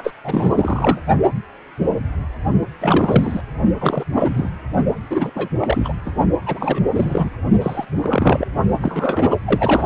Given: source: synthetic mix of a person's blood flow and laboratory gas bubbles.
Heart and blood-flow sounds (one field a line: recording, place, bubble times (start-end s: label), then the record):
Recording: Doppler ultrasound of blood flow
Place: precordium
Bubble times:
0.00-0.13 s: bubbles
0.23-0.51 s: bubbles
0.54-0.98 s: bubbles
2.79-3.42 s: bubbles
3.79-4.04 s: bubbles
4.12-4.50 s: bubbles
5.10-5.31 s: bubbles
5.35-5.49 s: bubbles
5.61-5.93 s: bubbles
6.06-6.11 s: bubbles
6.46-6.81 s: bubbles
6.96-7.30 s: bubbles
7.61-7.85 s: bubbles
7.99-8.47 s: bubbles
8.79-9.35 s: bubbles
9.45-9.86 s: bubbles
From the record:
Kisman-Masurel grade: 343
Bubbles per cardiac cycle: rolling drumbeat, 9 or more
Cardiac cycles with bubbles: 100%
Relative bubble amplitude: loud (0.450 to 0.775)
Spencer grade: 3 (all of the cardiac periods contain showers or single bubble signals, but not dominating or overriding the cardiac motion signals)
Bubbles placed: only in the low amplitude regions of the cardiac cycle